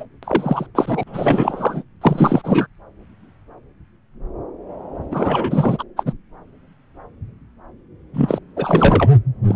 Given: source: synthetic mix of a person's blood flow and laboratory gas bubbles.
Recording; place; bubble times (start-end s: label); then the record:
Doppler ultrasound of blood flow; subclavian vein
0.00-0.05 s: bubbles
0.23-0.67 s: bubbles
0.75-1.03 s: bubbles
1.06-1.83 s: bubbles
2.01-2.67 s: bubbles
5.11-5.83 s: bubbles
5.96-6.12 s: bubbles
8.13-8.39 s: bubbles
8.56-9.10 s: bubbles
9.48-9.56 s: bubbles
From the record:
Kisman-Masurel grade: 333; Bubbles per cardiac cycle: rolling drumbeat, 9 or more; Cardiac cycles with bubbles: 50 to 99%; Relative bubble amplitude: loud (0.450 to 0.775); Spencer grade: 3 (all of the cardiac periods contain showers or single bubble signals, but not dominating or overriding the cardiac motion signals); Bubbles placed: anywhere in the cardiac cycle